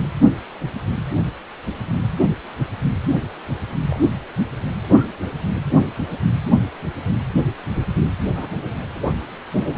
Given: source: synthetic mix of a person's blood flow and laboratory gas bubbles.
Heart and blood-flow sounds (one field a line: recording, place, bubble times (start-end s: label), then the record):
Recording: Doppler ultrasound of blood flow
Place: precordium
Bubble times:
1.15-1.34 s: bubbles
3.88-3.98 s: bubbles
4.89-5.06 s: bubbles
5.79-5.85 s: bubbles
8.36-8.47 s: bubbles
From the record:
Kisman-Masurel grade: 121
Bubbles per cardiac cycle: 1 to 2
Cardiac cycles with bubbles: 10 to 50%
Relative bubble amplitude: barely perceptible (0.100 to 0.250)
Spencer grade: 2 (many but less than half of the cardiac periods contain bubble signals, singularly or in groups)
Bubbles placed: anywhere in the cardiac cycle